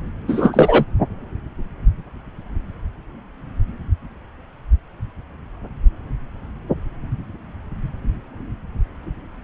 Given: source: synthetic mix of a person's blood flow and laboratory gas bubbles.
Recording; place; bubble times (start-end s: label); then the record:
Doppler ultrasound of blood flow; subclavian vein
0.28-0.85 s: bubbles
From the record:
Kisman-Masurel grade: 223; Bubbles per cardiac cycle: several, 3 to 8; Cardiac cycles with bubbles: 10 to 50%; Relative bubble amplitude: loud (0.450 to 0.775); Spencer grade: 2 (many but less than half of the cardiac periods contain bubble signals, singularly or in groups); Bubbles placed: anywhere in the cardiac cycle